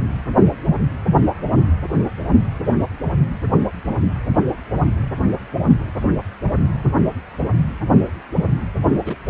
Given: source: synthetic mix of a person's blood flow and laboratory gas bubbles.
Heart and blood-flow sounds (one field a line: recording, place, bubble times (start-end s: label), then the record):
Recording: Doppler ultrasound of blood flow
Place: precordium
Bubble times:
9.06-9.16 s: bubbles
9.28-9.30 s: bubbles
From the record:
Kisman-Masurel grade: 112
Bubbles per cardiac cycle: 1 to 2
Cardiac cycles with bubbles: 1 to 10%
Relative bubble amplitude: moderate (0.250 to 0.450)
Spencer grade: 1 (occasional bubble signal discernible with the cardiac motion signal, with majority of cardiac periods free of bubbles)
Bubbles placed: anywhere in the cardiac cycle